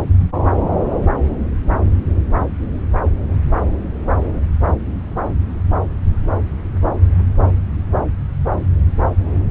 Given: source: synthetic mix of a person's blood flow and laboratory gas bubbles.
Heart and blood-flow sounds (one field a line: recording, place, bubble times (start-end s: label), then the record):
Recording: Doppler ultrasound of blood flow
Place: subclavian vein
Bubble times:
0.52-0.61 s: bubbles
From the record:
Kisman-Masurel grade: 111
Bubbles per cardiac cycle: 1 to 2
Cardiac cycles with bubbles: 1 to 10%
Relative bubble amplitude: barely perceptible (0.100 to 0.250)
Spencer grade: 1 (occasional bubble signal discernible with the cardiac motion signal, with majority of cardiac periods free of bubbles)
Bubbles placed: anywhere in the cardiac cycle